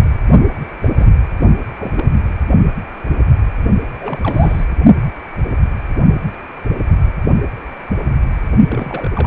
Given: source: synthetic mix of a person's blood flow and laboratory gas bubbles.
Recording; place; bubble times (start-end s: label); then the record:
Doppler ultrasound of blood flow; precordium
0.79-0.89 s: bubbles
0.98-1.06 s: bubbles
1.39-1.51 s: bubbles
1.79-1.92 s: bubbles
1.96-2.04 s: bubbles
4.01-4.65 s: bubbles
8.68-9.11 s: bubbles
9.16-9.26 s: bubbles
From the record:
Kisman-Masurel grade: 221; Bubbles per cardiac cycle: several, 3 to 8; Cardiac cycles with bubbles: 10 to 50%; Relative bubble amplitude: barely perceptible (0.100 to 0.250); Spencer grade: 2 (many but less than half of the cardiac periods contain bubble signals, singularly or in groups); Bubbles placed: only in the low amplitude regions of the cardiac cycle